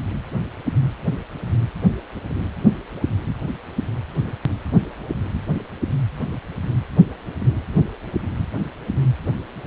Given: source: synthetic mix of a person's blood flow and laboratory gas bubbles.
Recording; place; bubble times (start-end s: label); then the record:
Doppler ultrasound of blood flow; precordium
no bubbles
From the record:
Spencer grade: 0 (complete lack of bubble signals)